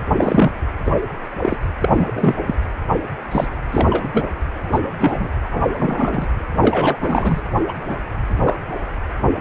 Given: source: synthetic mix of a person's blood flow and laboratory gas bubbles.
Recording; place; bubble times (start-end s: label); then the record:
Doppler ultrasound of blood flow; precordium
0.16-0.52 s: bubbles
0.85-0.93 s: bubbles
1.42-1.58 s: bubbles
1.81-2.36 s: bubbles
2.47-2.55 s: bubbles
3.31-3.47 s: bubbles
3.72-4.28 s: bubbles
4.72-4.88 s: bubbles
4.99-5.30 s: bubbles
5.51-6.26 s: bubbles
6.61-6.96 s: bubbles
7.01-7.41 s: bubbles
7.68-7.73 s: bubbles
7.88-7.98 s: bubbles
8.42-8.56 s: bubbles
From the record:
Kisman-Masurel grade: 243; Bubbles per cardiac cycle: several, 3 to 8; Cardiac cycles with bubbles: 100%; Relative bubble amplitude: loud (0.450 to 0.775); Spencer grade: 3 (all of the cardiac periods contain showers or single bubble signals, but not dominating or overriding the cardiac motion signals); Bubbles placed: anywhere in the cardiac cycle